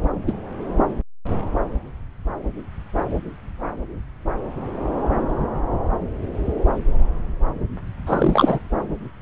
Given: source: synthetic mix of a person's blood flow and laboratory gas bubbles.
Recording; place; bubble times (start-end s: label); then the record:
Doppler ultrasound of blood flow; subclavian vein
0.27-0.33 s: bubbles
8.06-8.59 s: bubbles
From the record:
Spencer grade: 2 (many but less than half of the cardiac periods contain bubble signals, singularly or in groups); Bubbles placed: anywhere in the cardiac cycle